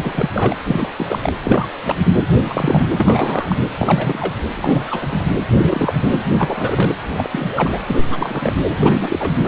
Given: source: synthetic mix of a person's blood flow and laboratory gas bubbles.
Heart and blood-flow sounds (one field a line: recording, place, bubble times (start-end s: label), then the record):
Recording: Doppler ultrasound of blood flow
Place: precordium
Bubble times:
0.00-0.30 s: bubbles
0.34-0.54 s: bubbles
0.66-0.91 s: bubbles
0.96-1.18 s: bubbles
1.21-1.32 s: bubbles
1.43-1.67 s: bubbles
1.84-1.97 s: bubbles
2.05-2.12 s: bubbles
2.30-2.87 s: bubbles
2.98-3.56 s: bubbles
3.58-3.67 s: bubbles
3.78-4.33 s: bubbles
4.54-5.25 s: bubbles
5.56-6.21 s: bubbles
6.36-6.96 s: bubbles
7.11-7.27 s: bubbles
7.32-7.79 s: bubbles
7.86-8.53 s: bubbles
8.69-9.31 s: bubbles
9.43-9.48 s: bubbles
From the record:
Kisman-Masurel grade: 343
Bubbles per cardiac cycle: rolling drumbeat, 9 or more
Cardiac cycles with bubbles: 100%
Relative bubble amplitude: loud (0.450 to 0.775)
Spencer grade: 3 (all of the cardiac periods contain showers or single bubble signals, but not dominating or overriding the cardiac motion signals)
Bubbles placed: anywhere in the cardiac cycle